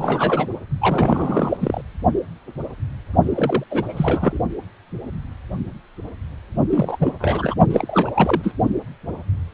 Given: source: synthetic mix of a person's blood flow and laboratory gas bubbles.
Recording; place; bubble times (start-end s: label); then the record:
Doppler ultrasound of blood flow; precordium
0.00-0.48 s: bubbles
0.81-1.57 s: bubbles
1.60-1.81 s: bubbles
3.23-3.64 s: bubbles
3.70-4.39 s: bubbles
6.71-7.14 s: bubbles
7.19-7.55 s: bubbles
7.70-8.10 s: bubbles
8.14-8.53 s: bubbles
From the record:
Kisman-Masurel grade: 332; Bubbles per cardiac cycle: rolling drumbeat, 9 or more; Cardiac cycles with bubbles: 50 to 99%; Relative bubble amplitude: moderate (0.250 to 0.450); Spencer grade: 3 (all of the cardiac periods contain showers or single bubble signals, but not dominating or overriding the cardiac motion signals); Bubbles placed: only in the low amplitude regions of the cardiac cycle